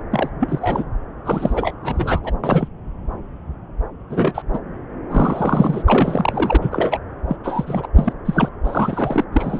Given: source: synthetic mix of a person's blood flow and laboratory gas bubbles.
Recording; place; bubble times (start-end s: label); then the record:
Doppler ultrasound of blood flow; subclavian vein
0.10-0.30 s: bubbles
0.39-0.84 s: bubbles
1.25-1.74 s: bubbles
1.83-2.19 s: bubbles
2.23-2.31 s: bubbles
2.44-2.68 s: bubbles
4.09-4.42 s: bubbles
4.53-4.59 s: bubbles
5.09-5.83 s: bubbles
5.88-6.57 s: bubbles
6.61-6.99 s: bubbles
7.29-7.36 s: bubbles
7.43-7.88 s: bubbles
7.96-8.13 s: bubbles
8.25-8.49 s: bubbles
8.64-9.24 s: bubbles
9.32-9.60 s: bubbles
From the record:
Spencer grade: 3 (all of the cardiac periods contain showers or single bubble signals, but not dominating or overriding the cardiac motion signals); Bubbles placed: anywhere in the cardiac cycle